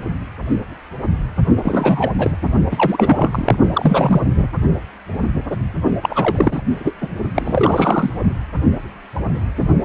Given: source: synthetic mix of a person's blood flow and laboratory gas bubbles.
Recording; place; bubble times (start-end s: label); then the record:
Doppler ultrasound of blood flow; precordium
1.56-2.10 s: bubbles
2.18-2.36 s: bubbles
2.71-3.57 s: bubbles
3.73-4.21 s: bubbles
4.35-4.46 s: bubbles
6.01-6.62 s: bubbles
6.79-6.93 s: bubbles
7.00-7.08 s: bubbles
7.34-8.11 s: bubbles
From the record:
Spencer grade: 3 (all of the cardiac periods contain showers or single bubble signals, but not dominating or overriding the cardiac motion signals); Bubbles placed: only in the low amplitude regions of the cardiac cycle